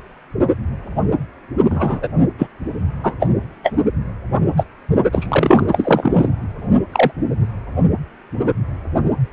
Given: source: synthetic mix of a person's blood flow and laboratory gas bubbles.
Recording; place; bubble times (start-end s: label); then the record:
Doppler ultrasound of blood flow; precordium
1.70-2.08 s: bubbles
2.38-2.47 s: bubbles
3.03-3.14 s: bubbles
3.19-3.29 s: bubbles
3.63-3.72 s: bubbles
4.57-4.64 s: bubbles
5.12-5.67 s: bubbles
5.72-6.28 s: bubbles
6.93-7.11 s: bubbles
From the record:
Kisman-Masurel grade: 233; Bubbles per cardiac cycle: several, 3 to 8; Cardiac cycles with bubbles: 50 to 99%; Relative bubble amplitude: loud (0.450 to 0.775); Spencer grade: 3 (all of the cardiac periods contain showers or single bubble signals, but not dominating or overriding the cardiac motion signals); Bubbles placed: only in the low amplitude regions of the cardiac cycle